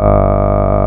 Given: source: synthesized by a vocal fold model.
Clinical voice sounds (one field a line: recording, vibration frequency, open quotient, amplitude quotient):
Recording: sustained vowel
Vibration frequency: 50 Hz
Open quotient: 0.5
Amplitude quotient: 1.2